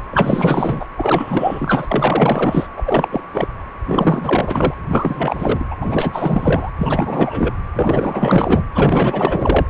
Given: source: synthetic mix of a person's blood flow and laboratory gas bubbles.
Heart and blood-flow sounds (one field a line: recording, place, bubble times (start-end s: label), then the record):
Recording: Doppler ultrasound of blood flow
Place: precordium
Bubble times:
0.10-0.86 s: bubbles
0.97-2.67 s: bubbles
2.77-3.08 s: bubbles
3.11-3.24 s: bubbles
3.31-3.48 s: bubbles
3.85-4.74 s: bubbles
4.88-5.64 s: bubbles
5.70-5.76 s: bubbles
5.82-6.71 s: bubbles
6.78-7.54 s: bubbles
7.74-8.64 s: bubbles
8.75-9.67 s: bubbles
From the record:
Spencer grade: 4 (maximum detectable bubble signal sounding continuously throughout systole and diastole of every cardiac period, and overriding the amplitude of the normal cardiac signals)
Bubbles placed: anywhere in the cardiac cycle